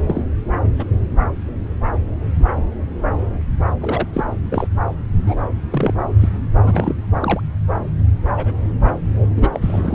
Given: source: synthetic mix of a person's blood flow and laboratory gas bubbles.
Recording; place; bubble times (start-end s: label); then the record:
Doppler ultrasound of blood flow; subclavian vein
0.06-0.22 s: bubbles
0.64-0.68 s: bubbles
0.78-0.86 s: bubbles
3.81-4.08 s: bubbles
4.13-4.24 s: bubbles
4.50-4.68 s: bubbles
5.17-5.40 s: bubbles
5.71-5.94 s: bubbles
6.20-6.29 s: bubbles
6.64-6.94 s: bubbles
7.20-7.41 s: bubbles
8.37-8.53 s: bubbles
9.36-9.48 s: bubbles
9.52-9.94 s: bubbles
From the record:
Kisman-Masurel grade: 232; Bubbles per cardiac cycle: several, 3 to 8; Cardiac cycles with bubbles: 50 to 99%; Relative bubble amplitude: moderate (0.250 to 0.450); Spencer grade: 3 (all of the cardiac periods contain showers or single bubble signals, but not dominating or overriding the cardiac motion signals); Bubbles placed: anywhere in the cardiac cycle